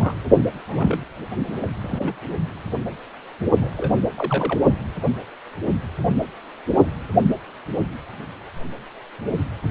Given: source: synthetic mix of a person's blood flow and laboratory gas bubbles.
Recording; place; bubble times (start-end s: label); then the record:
Doppler ultrasound of blood flow; precordium
0.00-0.14 s: bubbles
0.45-1.04 s: bubbles
1.62-1.69 s: bubbles
1.81-2.25 s: bubbles
3.61-3.71 s: bubbles
3.77-3.92 s: bubbles
4.18-4.60 s: bubbles
From the record:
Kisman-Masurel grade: 221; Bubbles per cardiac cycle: several, 3 to 8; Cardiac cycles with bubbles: 10 to 50%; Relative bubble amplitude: barely perceptible (0.100 to 0.250); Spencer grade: 2 (many but less than half of the cardiac periods contain bubble signals, singularly or in groups); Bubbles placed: only in the low amplitude regions of the cardiac cycle